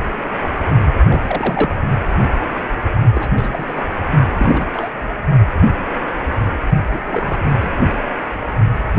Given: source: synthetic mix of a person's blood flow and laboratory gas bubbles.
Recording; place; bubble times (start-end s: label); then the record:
Doppler ultrasound of blood flow; precordium
0.84-0.95 s: bubbles
1.08-1.76 s: bubbles
3.14-3.30 s: bubbles
3.36-3.86 s: bubbles
4.38-4.66 s: bubbles
4.73-4.92 s: bubbles
6.93-6.98 s: bubbles
7.06-7.38 s: bubbles
7.46-7.54 s: bubbles
7.61-7.74 s: bubbles
From the record:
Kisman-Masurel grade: 332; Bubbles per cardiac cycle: rolling drumbeat, 9 or more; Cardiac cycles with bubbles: 50 to 99%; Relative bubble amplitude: moderate (0.250 to 0.450); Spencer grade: 3 (all of the cardiac periods contain showers or single bubble signals, but not dominating or overriding the cardiac motion signals); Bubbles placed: only in the low amplitude regions of the cardiac cycle